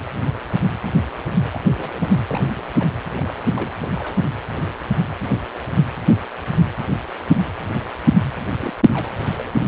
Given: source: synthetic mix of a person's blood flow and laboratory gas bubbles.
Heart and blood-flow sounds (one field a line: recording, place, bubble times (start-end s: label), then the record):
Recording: Doppler ultrasound of blood flow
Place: precordium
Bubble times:
1.51-1.60 s: bubbles
1.68-2.08 s: bubbles
2.28-2.64 s: bubbles
2.79-2.88 s: bubbles
3.17-3.37 s: bubbles
3.54-3.70 s: bubbles
3.76-3.92 s: bubbles
3.96-4.20 s: bubbles
8.59-8.74 s: bubbles
8.88-8.91 s: bubbles
8.94-9.12 s: bubbles
9.33-9.55 s: bubbles
From the record:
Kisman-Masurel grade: 221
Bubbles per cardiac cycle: several, 3 to 8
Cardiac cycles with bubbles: 10 to 50%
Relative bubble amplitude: barely perceptible (0.100 to 0.250)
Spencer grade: 2 (many but less than half of the cardiac periods contain bubble signals, singularly or in groups)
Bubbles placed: anywhere in the cardiac cycle